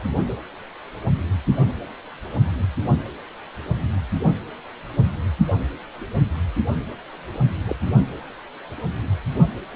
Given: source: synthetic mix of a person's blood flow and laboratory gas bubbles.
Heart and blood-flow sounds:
Doppler ultrasound of blood flow; precordium
0.28-0.32 s: bubbles
7.67-7.75 s: bubbles
From the record:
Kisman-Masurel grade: 122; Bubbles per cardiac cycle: 1 to 2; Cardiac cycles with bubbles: 10 to 50%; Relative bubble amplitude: moderate (0.250 to 0.450); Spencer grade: 2 (many but less than half of the cardiac periods contain bubble signals, singularly or in groups); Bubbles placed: only in the low amplitude regions of the cardiac cycle

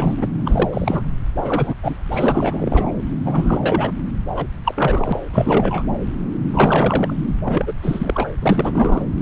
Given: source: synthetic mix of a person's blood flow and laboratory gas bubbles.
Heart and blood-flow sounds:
Doppler ultrasound of blood flow; subclavian vein
0.00-0.27 s: bubbles
0.45-0.69 s: bubbles
0.71-1.02 s: bubbles
1.37-1.75 s: bubbles
1.83-1.94 s: bubbles
2.12-2.92 s: bubbles
3.25-3.60 s: bubbles
3.62-3.92 s: bubbles
4.35-4.47 s: bubbles
4.64-5.19 s: bubbles
5.33-5.83 s: bubbles
6.53-7.14 s: bubbles
7.46-7.73 s: bubbles
7.82-8.29 s: bubbles
8.42-9.02 s: bubbles
From the record:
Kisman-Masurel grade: 332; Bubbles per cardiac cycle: rolling drumbeat, 9 or more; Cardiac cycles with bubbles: 50 to 99%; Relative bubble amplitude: moderate (0.250 to 0.450); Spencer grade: 3 (all of the cardiac periods contain showers or single bubble signals, but not dominating or overriding the cardiac motion signals); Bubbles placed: anywhere in the cardiac cycle

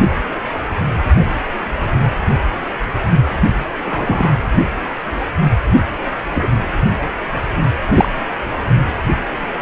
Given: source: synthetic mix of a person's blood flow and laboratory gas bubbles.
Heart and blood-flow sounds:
Doppler ultrasound of blood flow; precordium
3.85-4.35 s: bubbles
6.34-6.47 s: bubbles
7.94-8.08 s: bubbles
From the record:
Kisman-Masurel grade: 123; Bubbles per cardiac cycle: 1 to 2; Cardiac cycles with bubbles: 10 to 50%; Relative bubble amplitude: loud (0.450 to 0.775); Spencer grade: 2 (many but less than half of the cardiac periods contain bubble signals, singularly or in groups); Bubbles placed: only in the low amplitude regions of the cardiac cycle

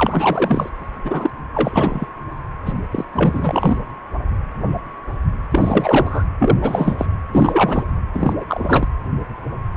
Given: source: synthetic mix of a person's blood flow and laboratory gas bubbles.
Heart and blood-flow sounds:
Doppler ultrasound of blood flow; precordium
0.00-0.69 s: bubbles
1.05-1.30 s: bubbles
1.53-2.06 s: bubbles
2.65-2.73 s: bubbles
2.91-3.04 s: bubbles
3.12-3.77 s: bubbles
5.51-6.24 s: bubbles
6.38-6.58 s: bubbles
6.60-7.06 s: bubbles
7.33-7.83 s: bubbles
8.13-8.33 s: bubbles
8.40-8.45 s: bubbles
8.48-8.88 s: bubbles
From the record:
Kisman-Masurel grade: 333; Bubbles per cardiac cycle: rolling drumbeat, 9 or more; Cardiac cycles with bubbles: 50 to 99%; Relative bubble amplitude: loud (0.450 to 0.775); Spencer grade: 3 (all of the cardiac periods contain showers or single bubble signals, but not dominating or overriding the cardiac motion signals); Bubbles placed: anywhere in the cardiac cycle

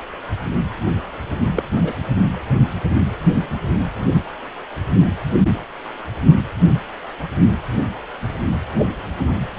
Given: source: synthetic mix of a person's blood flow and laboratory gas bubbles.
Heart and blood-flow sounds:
Doppler ultrasound of blood flow; precordium
1.54-1.63 s: bubbles
1.83-1.93 s: bubbles
From the record:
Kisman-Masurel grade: 112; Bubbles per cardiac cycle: 1 to 2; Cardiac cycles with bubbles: 1 to 10%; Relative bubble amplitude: moderate (0.250 to 0.450); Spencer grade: 1 (occasional bubble signal discernible with the cardiac motion signal, with majority of cardiac periods free of bubbles); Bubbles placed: anywhere in the cardiac cycle

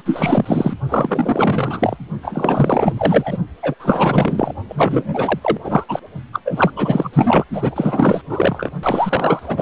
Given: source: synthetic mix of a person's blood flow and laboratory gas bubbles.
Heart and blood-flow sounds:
Doppler ultrasound of blood flow; precordium
0.00-0.02 s: bubbles
0.05-0.74 s: bubbles
0.89-1.96 s: bubbles
2.22-3.38 s: bubbles
3.62-3.75 s: bubbles
3.79-4.53 s: bubbles
4.68-5.57 s: bubbles
5.64-5.85 s: bubbles
5.88-5.99 s: bubbles
6.32-6.40 s: bubbles
6.45-6.70 s: bubbles
6.75-7.10 s: bubbles
7.13-7.44 s: bubbles
7.52-8.21 s: bubbles
8.29-8.71 s: bubbles
8.83-9.62 s: bubbles
From the record:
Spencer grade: 4 (maximum detectable bubble signal sounding continuously throughout systole and diastole of every cardiac period, and overriding the amplitude of the normal cardiac signals); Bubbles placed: only in the low amplitude regions of the cardiac cycle

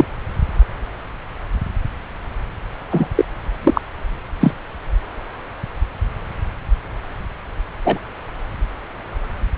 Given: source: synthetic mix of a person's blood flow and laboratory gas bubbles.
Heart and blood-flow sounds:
Doppler ultrasound of blood flow; subclavian vein
0.00-0.04 s: bubbles
2.91-3.08 s: bubbles
3.15-3.25 s: bubbles
3.64-3.81 s: bubbles
4.41-4.54 s: bubbles
7.84-7.99 s: bubbles
From the record:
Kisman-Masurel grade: 123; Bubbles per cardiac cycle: 1 to 2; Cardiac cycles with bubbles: 10 to 50%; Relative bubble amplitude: loud (0.450 to 0.775); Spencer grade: 2 (many but less than half of the cardiac periods contain bubble signals, singularly or in groups); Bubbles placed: anywhere in the cardiac cycle

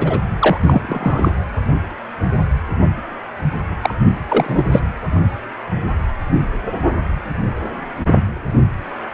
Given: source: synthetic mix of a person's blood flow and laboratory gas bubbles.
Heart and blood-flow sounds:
Doppler ultrasound of blood flow; precordium
0.00-0.19 s: bubbles
0.39-0.58 s: bubbles
0.62-1.33 s: bubbles
3.81-3.94 s: bubbles
4.28-4.82 s: bubbles
From the record:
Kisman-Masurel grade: 223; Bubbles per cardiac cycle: several, 3 to 8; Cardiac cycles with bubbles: 10 to 50%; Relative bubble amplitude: loud (0.450 to 0.775); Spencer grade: 2 (many but less than half of the cardiac periods contain bubble signals, singularly or in groups); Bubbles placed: anywhere in the cardiac cycle

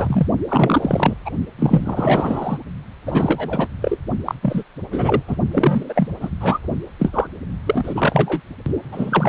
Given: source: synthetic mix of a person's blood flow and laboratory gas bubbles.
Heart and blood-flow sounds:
Doppler ultrasound of blood flow; precordium
0.00-0.27 s: bubbles
0.48-1.14 s: bubbles
1.25-1.30 s: bubbles
1.58-2.58 s: bubbles
3.06-3.68 s: bubbles
3.82-3.97 s: bubbles
4.26-4.34 s: bubbles
4.42-4.63 s: bubbles
4.92-5.21 s: bubbles
5.28-5.37 s: bubbles
5.51-6.08 s: bubbles
6.21-6.30 s: bubbles
6.41-6.58 s: bubbles
6.99-7.27 s: bubbles
7.66-8.40 s: bubbles
8.92-9.28 s: bubbles
From the record:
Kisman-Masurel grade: 342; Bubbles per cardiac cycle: rolling drumbeat, 9 or more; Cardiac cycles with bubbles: 100%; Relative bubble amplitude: moderate (0.250 to 0.450); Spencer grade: 3 (all of the cardiac periods contain showers or single bubble signals, but not dominating or overriding the cardiac motion signals); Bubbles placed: only in the low amplitude regions of the cardiac cycle

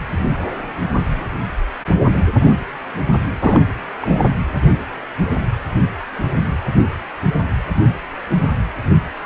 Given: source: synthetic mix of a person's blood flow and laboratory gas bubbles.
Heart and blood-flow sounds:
Doppler ultrasound of blood flow; precordium
3.41-3.62 s: bubbles
4.01-4.28 s: bubbles
From the record:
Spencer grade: 2 (many but less than half of the cardiac periods contain bubble signals, singularly or in groups); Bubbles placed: anywhere in the cardiac cycle

